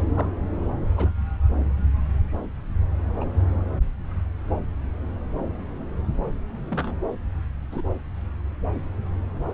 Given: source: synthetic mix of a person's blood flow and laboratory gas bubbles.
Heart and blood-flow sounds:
Doppler ultrasound of blood flow; subclavian vein
0.14-0.27 s: bubbles
0.97-1.09 s: bubbles
3.20-3.25 s: bubbles
6.71-6.96 s: bubbles
7.71-7.81 s: bubbles
8.75-8.79 s: bubbles
From the record:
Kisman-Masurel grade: 121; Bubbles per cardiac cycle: 1 to 2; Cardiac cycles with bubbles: 10 to 50%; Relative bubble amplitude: barely perceptible (0.100 to 0.250); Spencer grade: 2 (many but less than half of the cardiac periods contain bubble signals, singularly or in groups); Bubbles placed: anywhere in the cardiac cycle

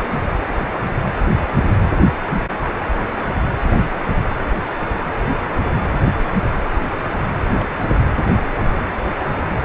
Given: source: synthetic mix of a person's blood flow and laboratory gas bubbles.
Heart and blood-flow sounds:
Doppler ultrasound of blood flow; precordium
7.54-7.99 s: bubbles
From the record:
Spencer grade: 1 (occasional bubble signal discernible with the cardiac motion signal, with majority of cardiac periods free of bubbles); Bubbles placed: anywhere in the cardiac cycle

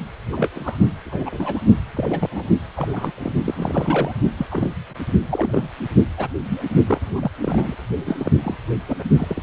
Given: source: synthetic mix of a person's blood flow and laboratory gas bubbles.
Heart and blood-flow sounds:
Doppler ultrasound of blood flow; precordium
0.32-0.49 s: bubbles
0.53-0.80 s: bubbles
1.05-1.59 s: bubbles
1.95-2.45 s: bubbles
2.76-3.11 s: bubbles
3.17-3.32 s: bubbles
3.44-4.12 s: bubbles
4.38-4.46 s: bubbles
4.51-4.74 s: bubbles
5.25-5.68 s: bubbles
5.79-5.84 s: bubbles
6.17-6.28 s: bubbles
6.43-6.62 s: bubbles
6.88-7.00 s: bubbles
7.05-7.30 s: bubbles
7.41-7.75 s: bubbles
8.06-8.32 s: bubbles
8.44-8.58 s: bubbles
8.88-9.04 s: bubbles
9.17-9.43 s: bubbles
From the record:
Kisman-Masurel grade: 242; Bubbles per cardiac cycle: several, 3 to 8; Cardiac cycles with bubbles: 100%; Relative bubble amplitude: moderate (0.250 to 0.450); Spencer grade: 3 (all of the cardiac periods contain showers or single bubble signals, but not dominating or overriding the cardiac motion signals); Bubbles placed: only in the low amplitude regions of the cardiac cycle

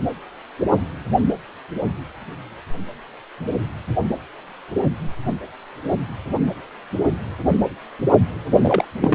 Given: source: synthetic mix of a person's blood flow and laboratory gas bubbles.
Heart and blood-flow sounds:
Doppler ultrasound of blood flow; precordium
8.61-8.85 s: bubbles
9.02-9.15 s: bubbles
From the record:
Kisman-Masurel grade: 222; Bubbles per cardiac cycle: several, 3 to 8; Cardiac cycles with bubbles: 10 to 50%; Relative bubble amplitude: moderate (0.250 to 0.450); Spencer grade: 2 (many but less than half of the cardiac periods contain bubble signals, singularly or in groups); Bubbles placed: only in the low amplitude regions of the cardiac cycle

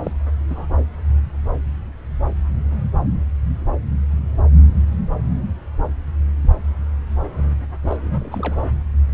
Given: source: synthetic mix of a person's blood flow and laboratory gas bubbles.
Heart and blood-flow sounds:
Doppler ultrasound of blood flow; subclavian vein
0.03-0.12 s: bubbles
0.49-0.66 s: bubbles
7.83-7.97 s: bubbles
8.01-8.61 s: bubbles
From the record:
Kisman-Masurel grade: 221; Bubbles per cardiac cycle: several, 3 to 8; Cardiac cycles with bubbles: 10 to 50%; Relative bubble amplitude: barely perceptible (0.100 to 0.250); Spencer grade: 2 (many but less than half of the cardiac periods contain bubble signals, singularly or in groups); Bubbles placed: anywhere in the cardiac cycle

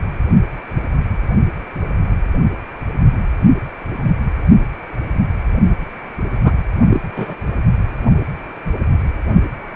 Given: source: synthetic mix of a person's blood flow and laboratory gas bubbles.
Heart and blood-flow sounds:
Doppler ultrasound of blood flow; precordium
6.44-6.52 s: bubbles
6.89-7.00 s: bubbles
7.16-7.35 s: bubbles
From the record:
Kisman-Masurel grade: 123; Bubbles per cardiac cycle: 1 to 2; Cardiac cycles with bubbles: 10 to 50%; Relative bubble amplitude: loud (0.450 to 0.775); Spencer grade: 2 (many but less than half of the cardiac periods contain bubble signals, singularly or in groups); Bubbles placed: anywhere in the cardiac cycle

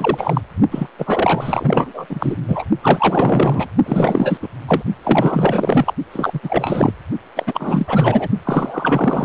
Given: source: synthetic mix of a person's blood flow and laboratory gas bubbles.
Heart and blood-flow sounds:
Doppler ultrasound of blood flow; precordium
0.00-0.41 s: bubbles
0.71-0.87 s: bubbles
0.98-2.06 s: bubbles
2.10-2.35 s: bubbles
2.48-2.66 s: bubbles
2.81-3.67 s: bubbles
3.85-4.38 s: bubbles
4.42-4.48 s: bubbles
4.68-4.82 s: bubbles
5.03-5.94 s: bubbles
6.12-6.93 s: bubbles
7.36-8.29 s: bubbles
8.44-9.25 s: bubbles
From the record:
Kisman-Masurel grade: 444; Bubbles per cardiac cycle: continuous sound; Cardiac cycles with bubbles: 100%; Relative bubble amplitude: maximal (0.775 to 0.999); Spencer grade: 4 (maximum detectable bubble signal sounding continuously throughout systole and diastole of every cardiac period, and overriding the amplitude of the normal cardiac signals); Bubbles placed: only in the low amplitude regions of the cardiac cycle

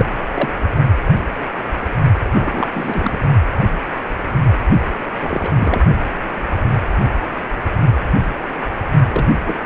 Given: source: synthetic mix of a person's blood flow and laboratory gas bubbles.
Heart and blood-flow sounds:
Doppler ultrasound of blood flow; precordium
0.00-0.05 s: bubbles
0.35-0.50 s: bubbles
2.31-2.67 s: bubbles
2.72-3.23 s: bubbles
5.19-5.50 s: bubbles
5.55-5.80 s: bubbles
9.08-9.26 s: bubbles
9.46-9.66 s: bubbles
From the record:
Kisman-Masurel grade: 232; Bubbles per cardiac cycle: several, 3 to 8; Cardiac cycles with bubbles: 50 to 99%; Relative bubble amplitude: moderate (0.250 to 0.450); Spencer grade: 3 (all of the cardiac periods contain showers or single bubble signals, but not dominating or overriding the cardiac motion signals); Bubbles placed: only in the low amplitude regions of the cardiac cycle

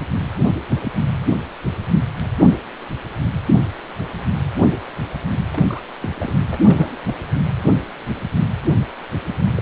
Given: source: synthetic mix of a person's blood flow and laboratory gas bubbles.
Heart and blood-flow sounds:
Doppler ultrasound of blood flow; precordium
5.53-5.63 s: bubbles
5.67-5.83 s: bubbles
6.00-6.39 s: bubbles
6.53-6.97 s: bubbles
7.05-7.14 s: bubbles
9.57-9.62 s: bubbles
From the record:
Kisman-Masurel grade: 221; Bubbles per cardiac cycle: several, 3 to 8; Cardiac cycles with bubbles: 10 to 50%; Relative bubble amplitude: barely perceptible (0.100 to 0.250); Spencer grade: 2 (many but less than half of the cardiac periods contain bubble signals, singularly or in groups); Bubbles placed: anywhere in the cardiac cycle

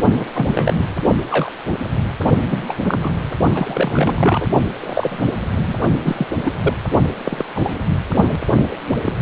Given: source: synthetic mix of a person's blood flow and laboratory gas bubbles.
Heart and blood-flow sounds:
Doppler ultrasound of blood flow; precordium
0.16-0.27 s: bubbles
0.33-0.84 s: bubbles
1.08-1.15 s: bubbles
1.29-1.52 s: bubbles
2.50-2.65 s: bubbles
2.67-2.76 s: bubbles
2.84-3.22 s: bubbles
3.54-4.48 s: bubbles
4.80-5.26 s: bubbles
5.55-5.80 s: bubbles
6.02-6.27 s: bubbles
6.44-6.53 s: bubbles
6.61-6.74 s: bubbles
7.25-7.46 s: bubbles
7.55-7.74 s: bubbles
8.47-8.54 s: bubbles
8.71-8.76 s: bubbles
9.04-9.13 s: bubbles
From the record:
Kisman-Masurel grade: 242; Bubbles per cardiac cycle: several, 3 to 8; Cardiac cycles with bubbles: 100%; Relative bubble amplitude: moderate (0.250 to 0.450); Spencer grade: 3 (all of the cardiac periods contain showers or single bubble signals, but not dominating or overriding the cardiac motion signals); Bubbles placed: only in the low amplitude regions of the cardiac cycle

